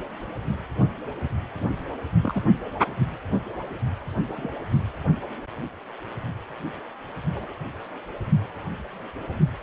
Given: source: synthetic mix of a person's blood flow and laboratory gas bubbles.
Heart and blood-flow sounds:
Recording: Doppler ultrasound of blood flow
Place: precordium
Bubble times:
2.23-2.42 s: bubbles
4.36-4.48 s: bubbles
4.70-4.79 s: bubbles
7.35-7.53 s: bubbles
From the record:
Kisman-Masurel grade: 121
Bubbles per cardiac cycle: 1 to 2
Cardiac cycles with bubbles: 10 to 50%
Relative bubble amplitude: barely perceptible (0.100 to 0.250)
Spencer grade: 2 (many but less than half of the cardiac periods contain bubble signals, singularly or in groups)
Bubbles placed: only in the low amplitude regions of the cardiac cycle

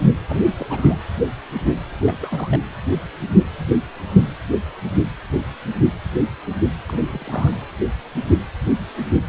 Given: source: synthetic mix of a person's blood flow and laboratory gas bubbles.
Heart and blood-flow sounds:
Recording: Doppler ultrasound of blood flow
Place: precordium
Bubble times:
0.26-0.42 s: bubbles
0.58-0.66 s: bubbles
0.69-0.98 s: bubbles
2.00-2.18 s: bubbles
2.21-2.60 s: bubbles
6.86-7.57 s: bubbles
From the record:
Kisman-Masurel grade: 221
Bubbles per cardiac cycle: several, 3 to 8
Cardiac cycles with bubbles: 10 to 50%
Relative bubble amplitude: barely perceptible (0.100 to 0.250)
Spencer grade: 2 (many but less than half of the cardiac periods contain bubble signals, singularly or in groups)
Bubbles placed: anywhere in the cardiac cycle

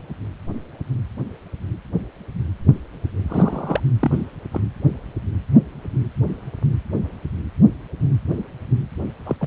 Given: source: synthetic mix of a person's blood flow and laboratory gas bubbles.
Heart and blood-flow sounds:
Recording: Doppler ultrasound of blood flow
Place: precordium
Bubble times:
3.28-3.81 s: bubbles
3.99-4.26 s: bubbles
4.52-4.60 s: bubbles
9.26-9.36 s: bubbles
9.41-9.47 s: bubbles
From the record:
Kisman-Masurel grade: 222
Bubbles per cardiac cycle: several, 3 to 8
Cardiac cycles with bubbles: 10 to 50%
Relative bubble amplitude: moderate (0.250 to 0.450)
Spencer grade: 2 (many but less than half of the cardiac periods contain bubble signals, singularly or in groups)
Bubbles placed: anywhere in the cardiac cycle

